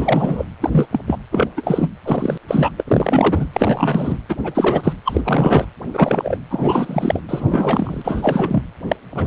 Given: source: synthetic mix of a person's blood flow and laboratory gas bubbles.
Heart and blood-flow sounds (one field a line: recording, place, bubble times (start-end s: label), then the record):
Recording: Doppler ultrasound of blood flow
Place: precordium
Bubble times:
0.00-0.45 s: bubbles
0.60-0.87 s: bubbles
0.92-1.00 s: bubbles
1.06-1.17 s: bubbles
1.32-1.48 s: bubbles
1.56-1.89 s: bubbles
2.04-2.38 s: bubbles
2.48-2.73 s: bubbles
2.77-2.83 s: bubbles
2.87-3.49 s: bubbles
3.52-4.17 s: bubbles
4.29-4.37 s: bubbles
4.44-4.93 s: bubbles
5.04-5.21 s: bubbles
5.24-5.66 s: bubbles
5.93-6.38 s: bubbles
6.50-7.20 s: bubbles
7.29-8.63 s: bubbles
8.88-8.96 s: bubbles
9.14-9.27 s: bubbles
From the record:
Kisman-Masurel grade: 343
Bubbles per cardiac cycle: rolling drumbeat, 9 or more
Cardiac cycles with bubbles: 100%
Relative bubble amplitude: loud (0.450 to 0.775)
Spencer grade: 3 (all of the cardiac periods contain showers or single bubble signals, but not dominating or overriding the cardiac motion signals)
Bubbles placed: anywhere in the cardiac cycle